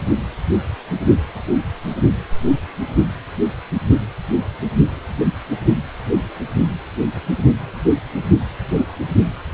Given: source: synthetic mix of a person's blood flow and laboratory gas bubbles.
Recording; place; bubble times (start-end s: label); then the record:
Doppler ultrasound of blood flow; precordium
no bubbles
From the record:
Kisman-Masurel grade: 000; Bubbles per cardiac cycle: 0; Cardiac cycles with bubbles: 0%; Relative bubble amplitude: no bubbles discernible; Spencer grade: 0 (complete lack of bubble signals)